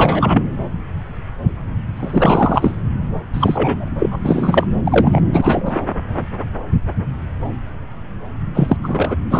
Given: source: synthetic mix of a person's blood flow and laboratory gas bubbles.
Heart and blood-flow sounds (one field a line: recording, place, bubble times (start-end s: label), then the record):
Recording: Doppler ultrasound of blood flow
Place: subclavian vein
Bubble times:
0.00-0.43 s: bubbles
1.95-2.72 s: bubbles
3.33-3.91 s: bubbles
3.99-4.17 s: bubbles
4.24-4.64 s: bubbles
4.85-5.21 s: bubbles
5.33-5.82 s: bubbles
8.54-8.77 s: bubbles
8.83-9.16 s: bubbles
9.31-9.40 s: bubbles
From the record:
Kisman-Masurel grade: 333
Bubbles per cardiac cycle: rolling drumbeat, 9 or more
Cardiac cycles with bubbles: 50 to 99%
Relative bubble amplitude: loud (0.450 to 0.775)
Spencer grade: 3 (all of the cardiac periods contain showers or single bubble signals, but not dominating or overriding the cardiac motion signals)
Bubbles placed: anywhere in the cardiac cycle